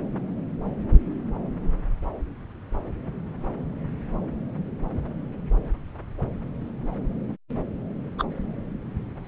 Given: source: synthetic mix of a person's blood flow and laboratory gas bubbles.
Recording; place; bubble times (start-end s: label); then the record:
Doppler ultrasound of blood flow; subclavian vein
8.18-8.24 s: bubbles
From the record:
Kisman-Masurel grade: 113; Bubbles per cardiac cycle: 1 to 2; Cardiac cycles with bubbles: 1 to 10%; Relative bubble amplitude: loud (0.450 to 0.775); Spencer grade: 1 (occasional bubble signal discernible with the cardiac motion signal, with majority of cardiac periods free of bubbles); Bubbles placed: anywhere in the cardiac cycle